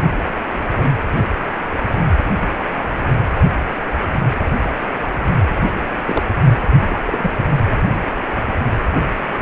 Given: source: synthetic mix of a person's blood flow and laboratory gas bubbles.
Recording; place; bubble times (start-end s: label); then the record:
Doppler ultrasound of blood flow; precordium
6.06-6.23 s: bubbles
6.89-6.99 s: bubbles
7.06-7.31 s: bubbles
From the record:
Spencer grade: 2 (many but less than half of the cardiac periods contain bubble signals, singularly or in groups); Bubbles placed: anywhere in the cardiac cycle